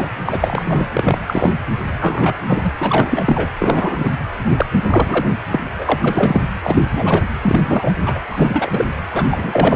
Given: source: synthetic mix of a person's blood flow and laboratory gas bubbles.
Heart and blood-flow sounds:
Doppler ultrasound of blood flow; precordium
0.00-0.08 s: bubbles
0.25-0.87 s: bubbles
0.93-1.19 s: bubbles
1.27-1.55 s: bubbles
1.99-2.34 s: bubbles
2.47-2.71 s: bubbles
2.78-3.49 s: bubbles
3.59-4.12 s: bubbles
4.56-4.66 s: bubbles
4.83-5.36 s: bubbles
5.51-5.63 s: bubbles
5.75-6.41 s: bubbles
6.63-6.81 s: bubbles
6.92-7.24 s: bubbles
7.42-7.63 s: bubbles
7.67-7.94 s: bubbles
8.05-8.20 s: bubbles
8.29-8.86 s: bubbles
9.12-9.75 s: bubbles
From the record:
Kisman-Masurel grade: 343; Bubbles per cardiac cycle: rolling drumbeat, 9 or more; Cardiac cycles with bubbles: 100%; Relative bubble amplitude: loud (0.450 to 0.775); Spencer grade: 3 (all of the cardiac periods contain showers or single bubble signals, but not dominating or overriding the cardiac motion signals); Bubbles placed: anywhere in the cardiac cycle

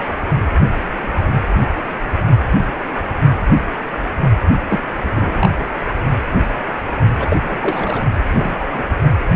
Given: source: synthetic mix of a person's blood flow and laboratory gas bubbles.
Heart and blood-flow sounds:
Doppler ultrasound of blood flow; precordium
4.69-4.79 s: bubbles
5.16-5.50 s: bubbles
7.20-7.37 s: bubbles
7.44-8.05 s: bubbles
8.29-8.55 s: bubbles
8.60-8.68 s: bubbles
8.72-8.83 s: bubbles
From the record:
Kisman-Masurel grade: 222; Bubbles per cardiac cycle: several, 3 to 8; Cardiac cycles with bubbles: 10 to 50%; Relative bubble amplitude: moderate (0.250 to 0.450); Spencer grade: 2 (many but less than half of the cardiac periods contain bubble signals, singularly or in groups); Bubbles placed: only in the low amplitude regions of the cardiac cycle

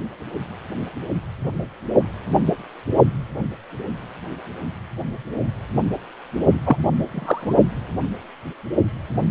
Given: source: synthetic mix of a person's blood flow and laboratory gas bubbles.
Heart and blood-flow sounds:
Doppler ultrasound of blood flow; precordium
6.65-6.76 s: bubbles
7.11-7.58 s: bubbles
From the record:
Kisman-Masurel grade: 123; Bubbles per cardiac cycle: 1 to 2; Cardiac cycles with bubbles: 10 to 50%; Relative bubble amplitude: loud (0.450 to 0.775); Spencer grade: 2 (many but less than half of the cardiac periods contain bubble signals, singularly or in groups); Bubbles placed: only in the low amplitude regions of the cardiac cycle

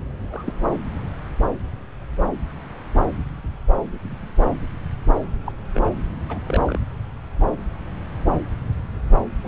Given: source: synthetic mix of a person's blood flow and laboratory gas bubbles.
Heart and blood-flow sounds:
Doppler ultrasound of blood flow; subclavian vein
0.30-0.54 s: bubbles
5.46-5.52 s: bubbles
5.74-5.89 s: bubbles
6.28-6.39 s: bubbles
6.44-6.80 s: bubbles
9.44-9.48 s: bubbles
From the record:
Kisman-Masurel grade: 121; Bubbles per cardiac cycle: 1 to 2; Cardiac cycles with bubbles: 10 to 50%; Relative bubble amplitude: barely perceptible (0.100 to 0.250); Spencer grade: 2 (many but less than half of the cardiac periods contain bubble signals, singularly or in groups); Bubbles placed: anywhere in the cardiac cycle

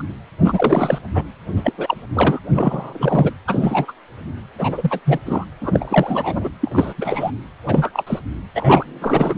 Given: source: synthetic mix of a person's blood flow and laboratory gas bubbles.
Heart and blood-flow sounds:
Doppler ultrasound of blood flow; precordium
0.00-0.02 s: bubbles
0.43-0.99 s: bubbles
1.15-1.25 s: bubbles
1.56-1.73 s: bubbles
1.77-1.97 s: bubbles
2.13-2.40 s: bubbles
2.51-3.31 s: bubbles
3.47-3.92 s: bubbles
4.58-5.00 s: bubbles
5.05-5.19 s: bubbles
5.25-5.45 s: bubbles
5.61-6.49 s: bubbles
6.61-6.94 s: bubbles
6.97-7.31 s: bubbles
7.66-7.90 s: bubbles
7.93-8.04 s: bubbles
8.06-8.20 s: bubbles
8.55-9.35 s: bubbles
From the record:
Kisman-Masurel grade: 343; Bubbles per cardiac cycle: rolling drumbeat, 9 or more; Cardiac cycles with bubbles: 100%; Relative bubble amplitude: loud (0.450 to 0.775); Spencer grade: 3 (all of the cardiac periods contain showers or single bubble signals, but not dominating or overriding the cardiac motion signals); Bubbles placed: anywhere in the cardiac cycle

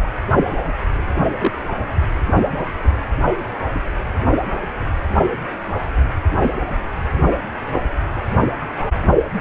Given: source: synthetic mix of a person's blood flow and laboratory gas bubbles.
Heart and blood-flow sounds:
Doppler ultrasound of blood flow; precordium
1.23-1.54 s: bubbles
7.73-7.82 s: bubbles
From the record:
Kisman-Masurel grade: 122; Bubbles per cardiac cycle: 1 to 2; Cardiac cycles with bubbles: 10 to 50%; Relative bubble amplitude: moderate (0.250 to 0.450); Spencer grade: 2 (many but less than half of the cardiac periods contain bubble signals, singularly or in groups); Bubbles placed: anywhere in the cardiac cycle

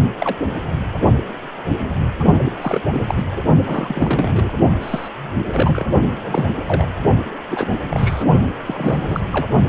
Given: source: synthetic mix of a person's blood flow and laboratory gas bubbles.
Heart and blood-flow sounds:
Doppler ultrasound of blood flow; precordium
0.19-0.36 s: bubbles
2.44-2.79 s: bubbles
2.93-3.15 s: bubbles
3.17-3.22 s: bubbles
3.65-4.51 s: bubbles
4.80-5.09 s: bubbles
5.48-5.84 s: bubbles
6.24-6.44 s: bubbles
6.67-6.89 s: bubbles
7.50-7.72 s: bubbles
7.90-8.24 s: bubbles
8.66-9.20 s: bubbles
9.33-9.48 s: bubbles
From the record:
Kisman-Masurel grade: 232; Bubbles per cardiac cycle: several, 3 to 8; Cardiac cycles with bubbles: 50 to 99%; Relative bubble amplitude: moderate (0.250 to 0.450); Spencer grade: 3 (all of the cardiac periods contain showers or single bubble signals, but not dominating or overriding the cardiac motion signals); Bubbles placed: only in the low amplitude regions of the cardiac cycle

